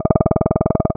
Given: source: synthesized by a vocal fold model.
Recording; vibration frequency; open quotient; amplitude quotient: sustained vowel; 20 Hz; 0.1; 1.3